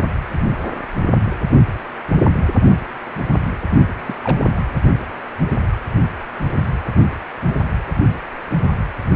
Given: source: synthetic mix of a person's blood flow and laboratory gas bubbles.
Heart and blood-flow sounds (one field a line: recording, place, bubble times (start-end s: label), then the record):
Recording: Doppler ultrasound of blood flow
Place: precordium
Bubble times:
4.06-4.15 s: bubbles
4.24-4.60 s: bubbles
7.47-7.54 s: bubbles
From the record:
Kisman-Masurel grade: 122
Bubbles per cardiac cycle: 1 to 2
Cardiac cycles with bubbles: 10 to 50%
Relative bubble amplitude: moderate (0.250 to 0.450)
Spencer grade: 2 (many but less than half of the cardiac periods contain bubble signals, singularly or in groups)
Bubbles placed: anywhere in the cardiac cycle